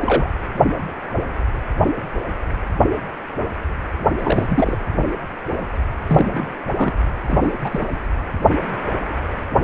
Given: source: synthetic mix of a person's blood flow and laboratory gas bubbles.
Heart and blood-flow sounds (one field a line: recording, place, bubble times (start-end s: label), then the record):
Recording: Doppler ultrasound of blood flow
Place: precordium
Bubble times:
0.00-0.30 s: bubbles
4.18-4.78 s: bubbles
6.06-6.54 s: bubbles
6.76-6.92 s: bubbles
7.28-7.54 s: bubbles
7.61-7.86 s: bubbles
From the record:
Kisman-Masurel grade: 222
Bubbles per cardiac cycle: several, 3 to 8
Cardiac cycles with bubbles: 10 to 50%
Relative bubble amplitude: moderate (0.250 to 0.450)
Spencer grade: 2 (many but less than half of the cardiac periods contain bubble signals, singularly or in groups)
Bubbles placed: anywhere in the cardiac cycle